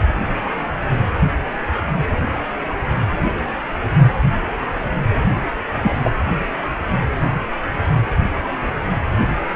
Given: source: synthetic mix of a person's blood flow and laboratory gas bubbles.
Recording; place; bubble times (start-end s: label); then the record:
Doppler ultrasound of blood flow; precordium
5.82-6.11 s: bubbles
From the record:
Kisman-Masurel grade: 112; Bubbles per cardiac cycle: 1 to 2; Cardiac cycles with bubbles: 1 to 10%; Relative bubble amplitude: moderate (0.250 to 0.450); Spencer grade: 1 (occasional bubble signal discernible with the cardiac motion signal, with majority of cardiac periods free of bubbles); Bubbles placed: anywhere in the cardiac cycle